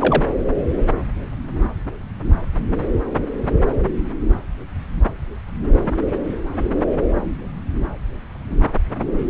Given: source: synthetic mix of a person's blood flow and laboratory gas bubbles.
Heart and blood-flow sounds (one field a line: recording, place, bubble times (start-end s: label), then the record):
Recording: Doppler ultrasound of blood flow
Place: subclavian vein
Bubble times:
0.00-0.25 s: bubbles
From the record:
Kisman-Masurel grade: 113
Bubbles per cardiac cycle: 1 to 2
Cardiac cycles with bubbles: 1 to 10%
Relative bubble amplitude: loud (0.450 to 0.775)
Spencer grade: 1 (occasional bubble signal discernible with the cardiac motion signal, with majority of cardiac periods free of bubbles)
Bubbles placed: anywhere in the cardiac cycle